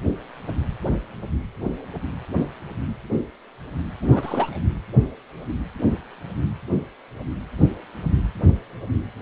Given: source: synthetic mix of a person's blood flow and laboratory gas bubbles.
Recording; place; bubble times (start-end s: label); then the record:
Doppler ultrasound of blood flow; precordium
4.02-4.58 s: bubbles
From the record:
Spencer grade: 1 (occasional bubble signal discernible with the cardiac motion signal, with majority of cardiac periods free of bubbles); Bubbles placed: anywhere in the cardiac cycle